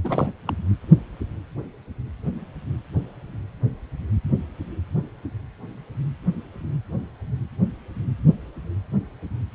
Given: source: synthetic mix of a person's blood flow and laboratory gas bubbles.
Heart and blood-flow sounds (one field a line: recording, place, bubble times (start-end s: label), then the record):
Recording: Doppler ultrasound of blood flow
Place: precordium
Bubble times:
0.04-0.33 s: bubbles
0.46-0.53 s: bubbles
From the record:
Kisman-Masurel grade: 221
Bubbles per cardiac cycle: several, 3 to 8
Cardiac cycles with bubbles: 10 to 50%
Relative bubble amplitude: barely perceptible (0.100 to 0.250)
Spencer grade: 2 (many but less than half of the cardiac periods contain bubble signals, singularly or in groups)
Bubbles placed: anywhere in the cardiac cycle